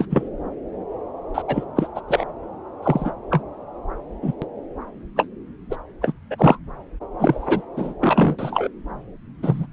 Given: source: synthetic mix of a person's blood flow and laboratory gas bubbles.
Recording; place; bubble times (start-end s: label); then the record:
Doppler ultrasound of blood flow; subclavian vein
0.00-0.05 s: bubbles
0.11-0.29 s: bubbles
1.34-1.42 s: bubbles
1.47-1.65 s: bubbles
1.76-1.88 s: bubbles
1.96-2.01 s: bubbles
2.08-2.25 s: bubbles
2.83-3.11 s: bubbles
3.31-3.41 s: bubbles
4.22-4.33 s: bubbles
4.42-4.47 s: bubbles
5.16-5.26 s: bubbles
5.71-5.76 s: bubbles
6.01-6.12 s: bubbles
6.30-6.35 s: bubbles
6.38-6.58 s: bubbles
7.19-7.62 s: bubbles
7.76-7.94 s: bubbles
8.00-8.69 s: bubbles
9.42-9.66 s: bubbles
From the record:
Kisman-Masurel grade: 233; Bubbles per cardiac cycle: several, 3 to 8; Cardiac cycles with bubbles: 50 to 99%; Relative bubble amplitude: loud (0.450 to 0.775); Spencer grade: 3 (all of the cardiac periods contain showers or single bubble signals, but not dominating or overriding the cardiac motion signals); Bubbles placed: anywhere in the cardiac cycle